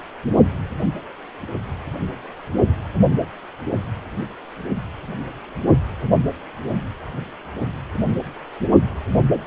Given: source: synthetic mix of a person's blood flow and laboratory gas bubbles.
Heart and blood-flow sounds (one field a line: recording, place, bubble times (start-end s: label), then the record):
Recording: Doppler ultrasound of blood flow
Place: precordium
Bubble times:
no bubbles
From the record:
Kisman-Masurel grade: 000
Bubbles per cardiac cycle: 0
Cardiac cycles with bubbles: 0%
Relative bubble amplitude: no bubbles discernible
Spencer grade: 0 (complete lack of bubble signals)